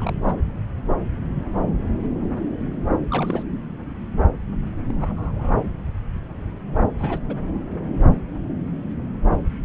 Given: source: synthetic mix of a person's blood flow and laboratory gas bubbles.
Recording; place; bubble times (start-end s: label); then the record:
Doppler ultrasound of blood flow; subclavian vein
0.00-0.35 s: bubbles
3.10-3.43 s: bubbles
4.88-4.94 s: bubbles
4.99-5.52 s: bubbles
6.98-7.18 s: bubbles
7.29-7.36 s: bubbles
From the record:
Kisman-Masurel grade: 221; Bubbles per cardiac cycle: several, 3 to 8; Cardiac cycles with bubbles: 10 to 50%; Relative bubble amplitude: barely perceptible (0.100 to 0.250); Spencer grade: 2 (many but less than half of the cardiac periods contain bubble signals, singularly or in groups); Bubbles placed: anywhere in the cardiac cycle